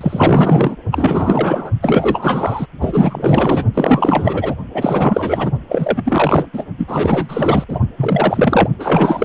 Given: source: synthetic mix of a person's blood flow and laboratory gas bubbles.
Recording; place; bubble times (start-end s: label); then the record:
Doppler ultrasound of blood flow; precordium
0.01-0.75 s: bubbles
0.92-1.71 s: bubbles
1.82-2.67 s: bubbles
2.80-3.64 s: bubbles
3.74-4.54 s: bubbles
4.74-5.52 s: bubbles
5.69-6.03 s: bubbles
6.05-6.46 s: bubbles
6.53-6.63 s: bubbles
6.78-7.64 s: bubbles
7.68-7.79 s: bubbles
7.97-8.68 s: bubbles
8.79-9.25 s: bubbles
From the record:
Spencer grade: 4 (maximum detectable bubble signal sounding continuously throughout systole and diastole of every cardiac period, and overriding the amplitude of the normal cardiac signals); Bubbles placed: only in the low amplitude regions of the cardiac cycle